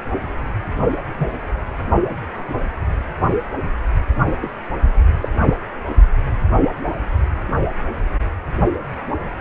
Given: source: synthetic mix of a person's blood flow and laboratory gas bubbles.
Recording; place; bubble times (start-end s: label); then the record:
Doppler ultrasound of blood flow; precordium
1.18-1.28 s: bubbles
4.26-4.37 s: bubbles
4.42-4.50 s: bubbles
5.21-5.29 s: bubbles
5.46-5.54 s: bubbles
From the record:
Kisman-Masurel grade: 122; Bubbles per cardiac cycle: 1 to 2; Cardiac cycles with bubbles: 10 to 50%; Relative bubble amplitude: moderate (0.250 to 0.450); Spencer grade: 2 (many but less than half of the cardiac periods contain bubble signals, singularly or in groups); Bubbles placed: only in the low amplitude regions of the cardiac cycle